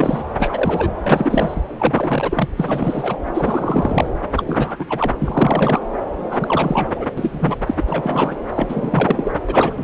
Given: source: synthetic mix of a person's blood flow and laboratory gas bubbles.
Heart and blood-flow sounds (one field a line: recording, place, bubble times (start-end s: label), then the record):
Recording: Doppler ultrasound of blood flow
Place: subclavian vein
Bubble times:
0.00-0.24 s: bubbles
0.33-0.90 s: bubbles
1.03-1.61 s: bubbles
1.78-2.48 s: bubbles
2.57-3.17 s: bubbles
3.34-4.07 s: bubbles
4.37-4.44 s: bubbles
4.46-4.76 s: bubbles
4.79-4.85 s: bubbles
4.89-5.13 s: bubbles
5.20-5.79 s: bubbles
6.18-6.92 s: bubbles
6.94-7.05 s: bubbles
7.17-7.56 s: bubbles
7.66-7.84 s: bubbles
7.87-8.37 s: bubbles
8.54-9.32 s: bubbles
9.48-9.83 s: bubbles
From the record:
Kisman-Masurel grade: 342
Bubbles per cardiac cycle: rolling drumbeat, 9 or more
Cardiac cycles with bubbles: 100%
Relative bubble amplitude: moderate (0.250 to 0.450)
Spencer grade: 3 (all of the cardiac periods contain showers or single bubble signals, but not dominating or overriding the cardiac motion signals)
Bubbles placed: anywhere in the cardiac cycle